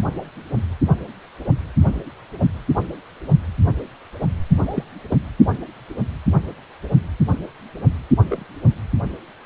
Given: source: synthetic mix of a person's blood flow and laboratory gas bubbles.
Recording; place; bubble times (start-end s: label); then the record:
Doppler ultrasound of blood flow; precordium
4.64-4.83 s: bubbles
5.08-5.18 s: bubbles
8.29-8.45 s: bubbles
From the record:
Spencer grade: 2 (many but less than half of the cardiac periods contain bubble signals, singularly or in groups); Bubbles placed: only in the low amplitude regions of the cardiac cycle